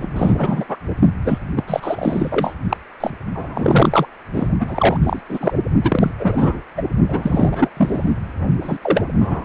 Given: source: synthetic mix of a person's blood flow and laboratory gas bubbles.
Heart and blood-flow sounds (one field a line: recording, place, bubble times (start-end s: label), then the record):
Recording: Doppler ultrasound of blood flow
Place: precordium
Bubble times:
0.00-0.65 s: bubbles
0.69-0.77 s: bubbles
1.24-1.39 s: bubbles
1.55-1.64 s: bubbles
1.67-2.54 s: bubbles
2.69-2.77 s: bubbles
3.00-3.10 s: bubbles
3.35-4.05 s: bubbles
4.33-4.48 s: bubbles
4.59-4.98 s: bubbles
5.03-5.20 s: bubbles
5.29-5.57 s: bubbles
5.83-6.12 s: bubbles
6.19-6.61 s: bubbles
6.77-6.83 s: bubbles
7.08-7.70 s: bubbles
7.77-8.13 s: bubbles
8.62-8.78 s: bubbles
8.82-9.04 s: bubbles
9.20-9.45 s: bubbles
From the record:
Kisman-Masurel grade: 343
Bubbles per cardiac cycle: rolling drumbeat, 9 or more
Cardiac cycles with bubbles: 100%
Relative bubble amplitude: loud (0.450 to 0.775)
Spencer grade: 3 (all of the cardiac periods contain showers or single bubble signals, but not dominating or overriding the cardiac motion signals)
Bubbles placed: only in the low amplitude regions of the cardiac cycle